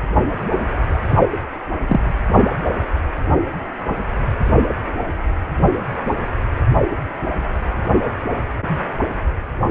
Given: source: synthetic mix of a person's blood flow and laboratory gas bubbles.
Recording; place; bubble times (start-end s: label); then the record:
Doppler ultrasound of blood flow; precordium
1.08-1.20 s: bubbles
1.89-2.00 s: bubbles
From the record:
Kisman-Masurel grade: 113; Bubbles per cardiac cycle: 1 to 2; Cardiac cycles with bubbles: 1 to 10%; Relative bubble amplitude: loud (0.450 to 0.775); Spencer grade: 1 (occasional bubble signal discernible with the cardiac motion signal, with majority of cardiac periods free of bubbles); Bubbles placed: anywhere in the cardiac cycle